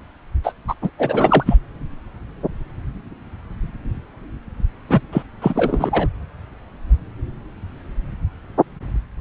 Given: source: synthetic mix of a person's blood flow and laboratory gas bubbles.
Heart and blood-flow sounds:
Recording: Doppler ultrasound of blood flow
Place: subclavian vein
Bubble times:
0.43-0.52 s: bubbles
0.68-0.74 s: bubbles
0.81-0.91 s: bubbles
0.98-1.56 s: bubbles
4.89-5.01 s: bubbles
5.12-5.23 s: bubbles
5.41-6.08 s: bubbles
From the record:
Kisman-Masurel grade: 223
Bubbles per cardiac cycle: several, 3 to 8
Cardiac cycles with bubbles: 10 to 50%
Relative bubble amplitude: loud (0.450 to 0.775)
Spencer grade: 2 (many but less than half of the cardiac periods contain bubble signals, singularly or in groups)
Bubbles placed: anywhere in the cardiac cycle

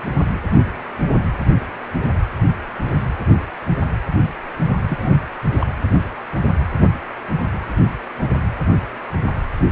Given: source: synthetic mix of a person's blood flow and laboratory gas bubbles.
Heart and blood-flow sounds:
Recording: Doppler ultrasound of blood flow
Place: precordium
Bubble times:
4.89-5.15 s: bubbles
5.61-5.67 s: bubbles
From the record:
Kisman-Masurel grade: 111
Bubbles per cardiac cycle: 1 to 2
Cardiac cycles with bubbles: 1 to 10%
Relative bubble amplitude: barely perceptible (0.100 to 0.250)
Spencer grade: 1 (occasional bubble signal discernible with the cardiac motion signal, with majority of cardiac periods free of bubbles)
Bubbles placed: anywhere in the cardiac cycle

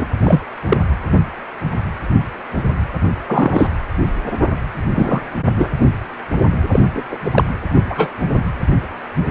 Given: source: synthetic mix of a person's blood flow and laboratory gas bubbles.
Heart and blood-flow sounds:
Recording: Doppler ultrasound of blood flow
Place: precordium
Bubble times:
0.00-0.08 s: bubbles
0.23-0.41 s: bubbles
0.68-0.77 s: bubbles
3.27-3.67 s: bubbles
4.95-5.21 s: bubbles
5.44-5.70 s: bubbles
6.71-6.79 s: bubbles
6.95-7.03 s: bubbles
7.08-7.17 s: bubbles
7.25-7.44 s: bubbles
7.75-7.82 s: bubbles
7.90-8.09 s: bubbles
From the record:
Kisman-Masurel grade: 233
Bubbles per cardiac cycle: several, 3 to 8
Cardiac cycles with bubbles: 50 to 99%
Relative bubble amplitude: loud (0.450 to 0.775)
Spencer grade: 3 (all of the cardiac periods contain showers or single bubble signals, but not dominating or overriding the cardiac motion signals)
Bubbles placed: anywhere in the cardiac cycle

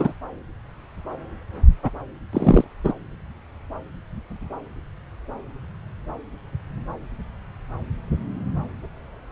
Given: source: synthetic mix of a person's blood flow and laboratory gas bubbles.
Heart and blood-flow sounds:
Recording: Doppler ultrasound of blood flow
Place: subclavian vein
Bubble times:
0.00-0.13 s: bubbles
1.83-1.90 s: bubbles
2.33-2.65 s: bubbles
2.83-2.93 s: bubbles
From the record:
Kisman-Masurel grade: 123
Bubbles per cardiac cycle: 1 to 2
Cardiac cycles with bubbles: 10 to 50%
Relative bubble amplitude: loud (0.450 to 0.775)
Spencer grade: 2 (many but less than half of the cardiac periods contain bubble signals, singularly or in groups)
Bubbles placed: anywhere in the cardiac cycle

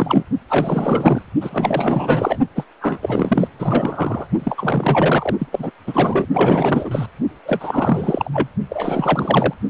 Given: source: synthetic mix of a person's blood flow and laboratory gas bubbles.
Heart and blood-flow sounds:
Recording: Doppler ultrasound of blood flow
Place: precordium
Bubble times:
0.00-0.23 s: bubbles
0.49-1.30 s: bubbles
1.41-2.38 s: bubbles
2.55-2.63 s: bubbles
2.81-2.99 s: bubbles
3.01-3.47 s: bubbles
3.58-4.27 s: bubbles
4.38-5.35 s: bubbles
5.38-5.47 s: bubbles
5.52-5.71 s: bubbles
5.87-6.26 s: bubbles
6.33-7.06 s: bubbles
7.45-8.30 s: bubbles
8.32-8.48 s: bubbles
8.70-9.54 s: bubbles
From the record:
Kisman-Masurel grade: 444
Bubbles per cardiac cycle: continuous sound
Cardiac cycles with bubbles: 100%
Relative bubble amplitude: maximal (0.775 to 0.999)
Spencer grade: 4 (maximum detectable bubble signal sounding continuously throughout systole and diastole of every cardiac period, and overriding the amplitude of the normal cardiac signals)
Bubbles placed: only in the low amplitude regions of the cardiac cycle

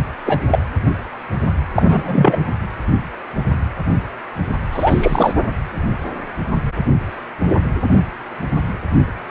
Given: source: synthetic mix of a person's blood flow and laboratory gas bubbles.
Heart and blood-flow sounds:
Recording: Doppler ultrasound of blood flow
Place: precordium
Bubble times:
0.26-0.40 s: bubbles
0.48-0.59 s: bubbles
1.75-2.46 s: bubbles
4.72-5.33 s: bubbles
From the record:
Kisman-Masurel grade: 223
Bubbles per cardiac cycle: several, 3 to 8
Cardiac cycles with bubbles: 10 to 50%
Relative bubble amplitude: loud (0.450 to 0.775)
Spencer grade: 2 (many but less than half of the cardiac periods contain bubble signals, singularly or in groups)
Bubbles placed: anywhere in the cardiac cycle

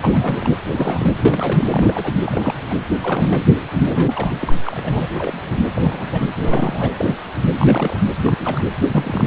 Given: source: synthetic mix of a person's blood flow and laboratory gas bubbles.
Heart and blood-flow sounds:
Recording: Doppler ultrasound of blood flow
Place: precordium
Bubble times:
0.00-0.52 s: bubbles
0.66-1.12 s: bubbles
1.17-1.67 s: bubbles
1.70-2.13 s: bubbles
2.24-2.55 s: bubbles
2.69-2.74 s: bubbles
3.02-3.45 s: bubbles
3.85-4.35 s: bubbles
4.41-4.50 s: bubbles
4.63-5.09 s: bubbles
5.14-5.56 s: bubbles
5.75-6.27 s: bubbles
6.35-6.92 s: bubbles
6.97-7.14 s: bubbles
7.58-8.00 s: bubbles
8.21-8.67 s: bubbles
8.83-9.25 s: bubbles
From the record:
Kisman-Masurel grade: 242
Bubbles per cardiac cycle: several, 3 to 8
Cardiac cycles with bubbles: 100%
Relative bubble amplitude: moderate (0.250 to 0.450)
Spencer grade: 3 (all of the cardiac periods contain showers or single bubble signals, but not dominating or overriding the cardiac motion signals)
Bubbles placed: anywhere in the cardiac cycle

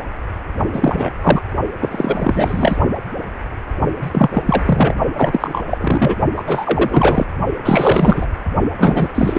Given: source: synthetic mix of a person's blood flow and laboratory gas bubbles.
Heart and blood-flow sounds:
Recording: Doppler ultrasound of blood flow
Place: precordium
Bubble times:
0.73-1.12 s: bubbles
1.22-1.41 s: bubbles
1.80-2.78 s: bubbles
4.01-4.42 s: bubbles
4.46-4.62 s: bubbles
4.66-4.94 s: bubbles
5.16-5.61 s: bubbles
5.66-6.17 s: bubbles
6.36-6.43 s: bubbles
6.46-7.27 s: bubbles
7.64-8.27 s: bubbles
8.78-9.12 s: bubbles
9.15-9.39 s: bubbles
From the record:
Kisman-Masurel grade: 333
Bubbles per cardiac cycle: rolling drumbeat, 9 or more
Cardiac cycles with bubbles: 50 to 99%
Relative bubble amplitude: loud (0.450 to 0.775)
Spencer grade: 3 (all of the cardiac periods contain showers or single bubble signals, but not dominating or overriding the cardiac motion signals)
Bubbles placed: only in the low amplitude regions of the cardiac cycle

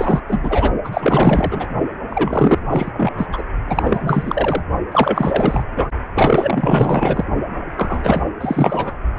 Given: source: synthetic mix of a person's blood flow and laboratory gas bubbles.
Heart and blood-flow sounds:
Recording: Doppler ultrasound of blood flow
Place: precordium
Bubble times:
0.00-0.20 s: bubbles
0.28-0.71 s: bubbles
0.84-1.68 s: bubbles
2.10-2.58 s: bubbles
2.69-3.26 s: bubbles
3.32-3.42 s: bubbles
3.67-4.62 s: bubbles
4.92-5.64 s: bubbles
5.75-5.88 s: bubbles
6.15-7.24 s: bubbles
7.76-8.23 s: bubbles
8.40-8.96 s: bubbles
From the record:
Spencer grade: 4 (maximum detectable bubble signal sounding continuously throughout systole and diastole of every cardiac period, and overriding the amplitude of the normal cardiac signals)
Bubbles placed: only in the low amplitude regions of the cardiac cycle

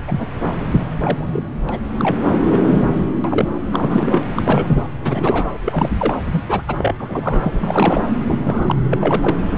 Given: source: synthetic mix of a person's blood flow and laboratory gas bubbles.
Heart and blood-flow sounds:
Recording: Doppler ultrasound of blood flow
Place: subclavian vein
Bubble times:
0.07-0.27 s: bubbles
1.00-1.28 s: bubbles
1.32-1.42 s: bubbles
1.69-1.77 s: bubbles
1.98-2.16 s: bubbles
2.49-2.58 s: bubbles
2.69-2.84 s: bubbles
2.92-3.02 s: bubbles
3.24-3.50 s: bubbles
3.72-4.22 s: bubbles
4.35-4.82 s: bubbles
5.00-5.51 s: bubbles
5.65-5.91 s: bubbles
5.98-6.14 s: bubbles
6.30-6.43 s: bubbles
6.48-6.62 s: bubbles
6.68-6.95 s: bubbles
7.00-8.01 s: bubbles
8.23-8.75 s: bubbles
8.90-9.38 s: bubbles
9.56-9.58 s: bubbles
From the record:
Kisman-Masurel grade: 242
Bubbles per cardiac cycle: several, 3 to 8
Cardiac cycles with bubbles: 100%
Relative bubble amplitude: moderate (0.250 to 0.450)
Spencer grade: 3 (all of the cardiac periods contain showers or single bubble signals, but not dominating or overriding the cardiac motion signals)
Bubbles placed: anywhere in the cardiac cycle

